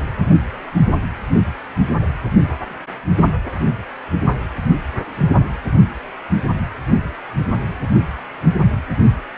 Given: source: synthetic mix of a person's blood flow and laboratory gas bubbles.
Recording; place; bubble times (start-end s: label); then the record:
Doppler ultrasound of blood flow; precordium
no bubbles
From the record:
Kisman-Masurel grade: 000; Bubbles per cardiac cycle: 0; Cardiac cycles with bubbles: 0%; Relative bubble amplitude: no bubbles discernible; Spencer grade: 0 (complete lack of bubble signals)